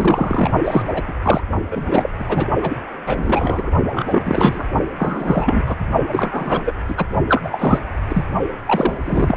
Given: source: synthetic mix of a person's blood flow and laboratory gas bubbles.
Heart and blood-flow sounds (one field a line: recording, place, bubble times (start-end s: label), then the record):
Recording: Doppler ultrasound of blood flow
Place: precordium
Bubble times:
0.00-0.51 s: bubbles
0.64-1.03 s: bubbles
1.07-1.13 s: bubbles
1.22-1.41 s: bubbles
1.71-2.10 s: bubbles
2.19-2.47 s: bubbles
2.62-2.77 s: bubbles
3.06-3.71 s: bubbles
3.92-4.64 s: bubbles
4.98-5.63 s: bubbles
5.66-5.75 s: bubbles
6.11-6.63 s: bubbles
6.66-6.73 s: bubbles
6.88-7.05 s: bubbles
7.28-7.42 s: bubbles
7.44-7.79 s: bubbles
8.08-8.23 s: bubbles
8.65-9.37 s: bubbles
From the record:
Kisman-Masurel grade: 343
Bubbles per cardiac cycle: rolling drumbeat, 9 or more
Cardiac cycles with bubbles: 100%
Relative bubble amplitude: loud (0.450 to 0.775)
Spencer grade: 3 (all of the cardiac periods contain showers or single bubble signals, but not dominating or overriding the cardiac motion signals)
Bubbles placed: only in the low amplitude regions of the cardiac cycle